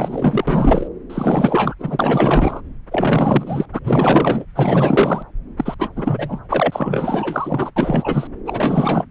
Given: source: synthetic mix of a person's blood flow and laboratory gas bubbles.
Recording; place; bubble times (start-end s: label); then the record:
Doppler ultrasound of blood flow; subclavian vein
0.00-0.44 s: bubbles
0.47-0.88 s: bubbles
1.10-1.75 s: bubbles
1.79-2.61 s: bubbles
2.91-3.66 s: bubbles
3.72-3.79 s: bubbles
3.83-4.46 s: bubbles
4.55-5.22 s: bubbles
5.56-5.75 s: bubbles
5.79-5.89 s: bubbles
5.96-6.40 s: bubbles
6.50-7.71 s: bubbles
7.76-8.27 s: bubbles
8.46-9.04 s: bubbles
From the record:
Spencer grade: 4 (maximum detectable bubble signal sounding continuously throughout systole and diastole of every cardiac period, and overriding the amplitude of the normal cardiac signals); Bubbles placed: anywhere in the cardiac cycle